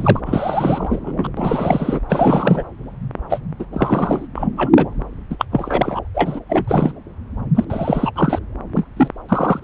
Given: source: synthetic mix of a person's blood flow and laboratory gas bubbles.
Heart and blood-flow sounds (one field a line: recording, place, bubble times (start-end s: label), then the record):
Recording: Doppler ultrasound of blood flow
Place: subclavian vein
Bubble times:
0.00-0.20 s: bubbles
0.26-1.27 s: bubbles
1.37-1.99 s: bubbles
2.09-2.64 s: bubbles
3.29-3.41 s: bubbles
3.59-3.66 s: bubbles
3.73-4.28 s: bubbles
4.34-4.48 s: bubbles
4.57-4.70 s: bubbles
4.74-4.87 s: bubbles
5.30-5.36 s: bubbles
5.38-5.45 s: bubbles
5.52-6.00 s: bubbles
6.14-6.40 s: bubbles
6.49-6.93 s: bubbles
7.54-7.65 s: bubbles
7.70-8.12 s: bubbles
8.15-8.39 s: bubbles
8.74-8.86 s: bubbles
8.96-9.08 s: bubbles
9.29-9.60 s: bubbles
From the record:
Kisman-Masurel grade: 343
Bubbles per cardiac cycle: rolling drumbeat, 9 or more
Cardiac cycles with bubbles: 100%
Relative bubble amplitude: loud (0.450 to 0.775)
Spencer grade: 3 (all of the cardiac periods contain showers or single bubble signals, but not dominating or overriding the cardiac motion signals)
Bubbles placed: anywhere in the cardiac cycle